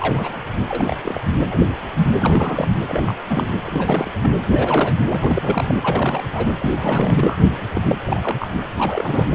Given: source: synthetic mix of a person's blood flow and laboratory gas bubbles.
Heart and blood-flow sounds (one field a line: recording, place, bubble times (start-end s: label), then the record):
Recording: Doppler ultrasound of blood flow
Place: precordium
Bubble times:
0.00-0.39 s: bubbles
0.69-0.96 s: bubbles
1.03-1.26 s: bubbles
1.50-1.58 s: bubbles
2.19-2.68 s: bubbles
2.89-3.15 s: bubbles
3.29-3.50 s: bubbles
3.65-4.12 s: bubbles
4.22-4.31 s: bubbles
4.51-4.95 s: bubbles
5.08-5.78 s: bubbles
5.80-6.21 s: bubbles
6.35-6.47 s: bubbles
6.58-7.37 s: bubbles
7.73-7.81 s: bubbles
7.86-7.96 s: bubbles
8.05-8.37 s: bubbles
8.39-8.47 s: bubbles
8.55-8.62 s: bubbles
8.76-9.25 s: bubbles
From the record:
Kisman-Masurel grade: 332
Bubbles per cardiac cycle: rolling drumbeat, 9 or more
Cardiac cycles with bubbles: 50 to 99%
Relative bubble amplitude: moderate (0.250 to 0.450)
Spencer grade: 3 (all of the cardiac periods contain showers or single bubble signals, but not dominating or overriding the cardiac motion signals)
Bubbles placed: anywhere in the cardiac cycle